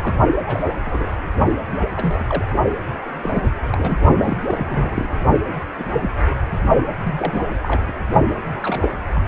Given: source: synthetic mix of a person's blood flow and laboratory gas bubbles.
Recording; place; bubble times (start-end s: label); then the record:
Doppler ultrasound of blood flow; precordium
0.00-0.15 s: bubbles
0.46-0.64 s: bubbles
0.84-1.12 s: bubbles
1.97-2.24 s: bubbles
2.29-2.45 s: bubbles
3.14-3.50 s: bubbles
3.71-4.02 s: bubbles
4.21-4.36 s: bubbles
4.45-5.18 s: bubbles
5.79-5.84 s: bubbles
5.96-6.11 s: bubbles
7.04-7.44 s: bubbles
7.62-7.84 s: bubbles
7.88-7.93 s: bubbles
8.62-8.88 s: bubbles
9.14-9.28 s: bubbles
From the record:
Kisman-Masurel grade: 242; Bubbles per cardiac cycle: several, 3 to 8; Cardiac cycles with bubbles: 100%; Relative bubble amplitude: moderate (0.250 to 0.450); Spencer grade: 3 (all of the cardiac periods contain showers or single bubble signals, but not dominating or overriding the cardiac motion signals); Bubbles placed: only in the low amplitude regions of the cardiac cycle